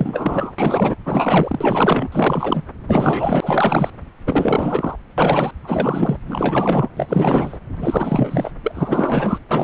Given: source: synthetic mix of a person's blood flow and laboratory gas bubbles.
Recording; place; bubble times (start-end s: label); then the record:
Doppler ultrasound of blood flow; subclavian vein
0.00-0.53 s: bubbles
0.58-0.96 s: bubbles
1.05-2.08 s: bubbles
2.12-2.63 s: bubbles
2.87-3.90 s: bubbles
4.27-4.96 s: bubbles
5.17-5.51 s: bubbles
5.63-6.17 s: bubbles
6.27-6.89 s: bubbles
6.96-7.58 s: bubbles
7.77-8.51 s: bubbles
8.63-8.72 s: bubbles
8.75-9.38 s: bubbles
9.51-9.63 s: bubbles
From the record:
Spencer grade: 4 (maximum detectable bubble signal sounding continuously throughout systole and diastole of every cardiac period, and overriding the amplitude of the normal cardiac signals); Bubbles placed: anywhere in the cardiac cycle